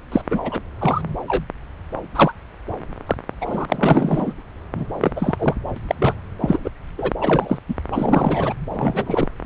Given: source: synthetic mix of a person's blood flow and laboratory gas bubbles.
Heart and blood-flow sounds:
Doppler ultrasound of blood flow; subclavian vein
0.12-0.22 s: bubbles
0.30-0.40 s: bubbles
0.43-0.60 s: bubbles
0.79-1.01 s: bubbles
1.27-1.45 s: bubbles
2.15-2.33 s: bubbles
3.06-3.16 s: bubbles
3.41-3.65 s: bubbles
3.69-4.33 s: bubbles
4.75-4.85 s: bubbles
5.01-5.35 s: bubbles
5.38-5.54 s: bubbles
5.76-5.79 s: bubbles
5.87-5.95 s: bubbles
5.98-6.14 s: bubbles
6.40-6.59 s: bubbles
6.63-6.70 s: bubbles
6.97-7.12 s: bubbles
7.21-7.58 s: bubbles
7.68-7.75 s: bubbles
7.92-8.54 s: bubbles
8.74-9.28 s: bubbles
From the record:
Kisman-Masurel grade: 243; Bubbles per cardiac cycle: several, 3 to 8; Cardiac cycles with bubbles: 100%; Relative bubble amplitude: loud (0.450 to 0.775); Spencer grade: 3 (all of the cardiac periods contain showers or single bubble signals, but not dominating or overriding the cardiac motion signals); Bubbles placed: anywhere in the cardiac cycle

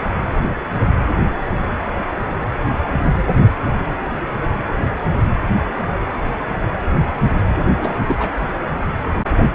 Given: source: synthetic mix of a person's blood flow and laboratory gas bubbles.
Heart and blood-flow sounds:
Doppler ultrasound of blood flow; precordium
7.78-8.01 s: bubbles
8.04-8.30 s: bubbles
8.41-8.48 s: bubbles
From the record:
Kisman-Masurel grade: 212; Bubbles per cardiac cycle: several, 3 to 8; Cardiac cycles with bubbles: 1 to 10%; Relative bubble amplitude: moderate (0.250 to 0.450); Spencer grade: 1 (occasional bubble signal discernible with the cardiac motion signal, with majority of cardiac periods free of bubbles); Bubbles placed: anywhere in the cardiac cycle

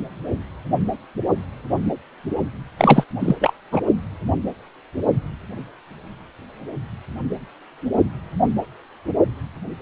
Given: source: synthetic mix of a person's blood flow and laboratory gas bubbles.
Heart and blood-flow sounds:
Doppler ultrasound of blood flow; precordium
2.77-3.04 s: bubbles
3.19-3.37 s: bubbles
3.40-3.54 s: bubbles
3.72-3.81 s: bubbles
From the record:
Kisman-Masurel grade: 223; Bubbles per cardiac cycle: several, 3 to 8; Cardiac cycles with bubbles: 10 to 50%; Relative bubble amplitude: loud (0.450 to 0.775); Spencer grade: 2 (many but less than half of the cardiac periods contain bubble signals, singularly or in groups); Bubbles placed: only in the low amplitude regions of the cardiac cycle

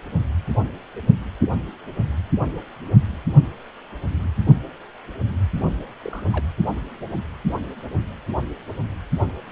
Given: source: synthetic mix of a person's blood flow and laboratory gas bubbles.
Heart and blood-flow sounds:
Doppler ultrasound of blood flow; precordium
6.03-6.45 s: bubbles
From the record:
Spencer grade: 2 (many but less than half of the cardiac periods contain bubble signals, singularly or in groups); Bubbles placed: anywhere in the cardiac cycle

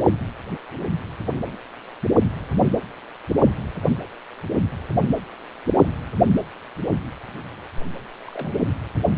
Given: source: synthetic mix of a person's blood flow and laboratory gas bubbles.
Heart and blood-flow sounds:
Doppler ultrasound of blood flow; precordium
0.00-0.07 s: bubbles
1.33-1.57 s: bubbles
8.25-8.53 s: bubbles
From the record:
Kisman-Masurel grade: 121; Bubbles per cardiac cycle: 1 to 2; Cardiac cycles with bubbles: 10 to 50%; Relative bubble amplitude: barely perceptible (0.100 to 0.250); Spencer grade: 2 (many but less than half of the cardiac periods contain bubble signals, singularly or in groups); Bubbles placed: anywhere in the cardiac cycle

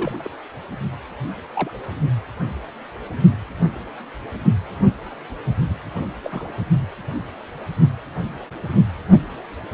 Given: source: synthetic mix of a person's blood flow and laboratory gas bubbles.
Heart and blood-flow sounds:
Doppler ultrasound of blood flow; precordium
0.00-0.30 s: bubbles
1.53-1.70 s: bubbles
6.23-6.64 s: bubbles
From the record:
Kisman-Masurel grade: 121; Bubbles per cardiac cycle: 1 to 2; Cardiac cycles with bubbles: 10 to 50%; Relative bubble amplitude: barely perceptible (0.100 to 0.250); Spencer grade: 2 (many but less than half of the cardiac periods contain bubble signals, singularly or in groups); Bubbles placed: only in the low amplitude regions of the cardiac cycle

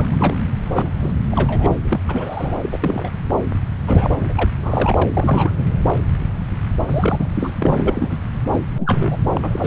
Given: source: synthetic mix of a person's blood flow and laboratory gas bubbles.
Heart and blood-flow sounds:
Doppler ultrasound of blood flow; subclavian vein
0.00-0.38 s: bubbles
0.65-0.89 s: bubbles
1.00-1.12 s: bubbles
1.31-1.78 s: bubbles
1.82-2.01 s: bubbles
2.08-2.57 s: bubbles
2.62-3.17 s: bubbles
3.87-4.27 s: bubbles
4.29-4.33 s: bubbles
4.37-4.50 s: bubbles
4.59-5.08 s: bubbles
5.13-5.51 s: bubbles
5.57-5.64 s: bubbles
6.86-7.29 s: bubbles
7.34-7.54 s: bubbles
7.58-8.18 s: bubbles
8.51-8.59 s: bubbles
8.76-9.16 s: bubbles
9.33-9.67 s: bubbles
From the record:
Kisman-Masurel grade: 232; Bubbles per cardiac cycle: several, 3 to 8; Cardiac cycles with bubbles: 50 to 99%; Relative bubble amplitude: moderate (0.250 to 0.450); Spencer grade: 3 (all of the cardiac periods contain showers or single bubble signals, but not dominating or overriding the cardiac motion signals); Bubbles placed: anywhere in the cardiac cycle

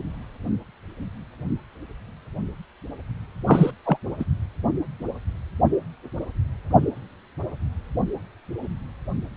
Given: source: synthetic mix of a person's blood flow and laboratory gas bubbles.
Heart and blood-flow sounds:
Doppler ultrasound of blood flow; precordium
3.47-3.71 s: bubbles
3.84-3.97 s: bubbles
4.19-4.25 s: bubbles
From the record:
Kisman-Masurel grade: 213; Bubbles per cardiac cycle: several, 3 to 8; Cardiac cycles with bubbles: 1 to 10%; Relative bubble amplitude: loud (0.450 to 0.775); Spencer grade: 1 (occasional bubble signal discernible with the cardiac motion signal, with majority of cardiac periods free of bubbles); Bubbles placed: only in the low amplitude regions of the cardiac cycle

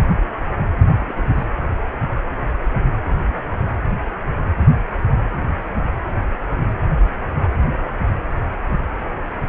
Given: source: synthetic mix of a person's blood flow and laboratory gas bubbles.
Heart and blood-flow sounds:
Doppler ultrasound of blood flow; precordium
0.72-0.76 s: bubbles
1.00-1.13 s: bubbles
1.17-1.29 s: bubbles
1.34-1.46 s: bubbles
From the record:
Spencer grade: 1 (occasional bubble signal discernible with the cardiac motion signal, with majority of cardiac periods free of bubbles); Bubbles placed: anywhere in the cardiac cycle

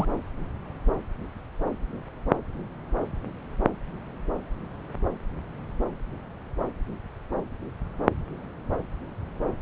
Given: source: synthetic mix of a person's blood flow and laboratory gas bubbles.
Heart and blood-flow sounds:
Doppler ultrasound of blood flow; subclavian vein
0.00-0.05 s: bubbles
From the record:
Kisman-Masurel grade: 222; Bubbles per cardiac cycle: several, 3 to 8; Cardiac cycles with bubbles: 10 to 50%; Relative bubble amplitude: moderate (0.250 to 0.450); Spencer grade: 2 (many but less than half of the cardiac periods contain bubble signals, singularly or in groups); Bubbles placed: anywhere in the cardiac cycle

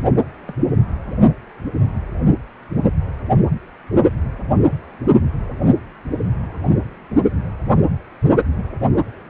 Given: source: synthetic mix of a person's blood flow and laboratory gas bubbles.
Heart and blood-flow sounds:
Doppler ultrasound of blood flow; precordium
0.47-0.53 s: bubbles
From the record:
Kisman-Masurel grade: 111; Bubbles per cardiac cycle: 1 to 2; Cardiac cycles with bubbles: 1 to 10%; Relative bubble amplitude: barely perceptible (0.100 to 0.250); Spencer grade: 1 (occasional bubble signal discernible with the cardiac motion signal, with majority of cardiac periods free of bubbles); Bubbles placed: only in the low amplitude regions of the cardiac cycle

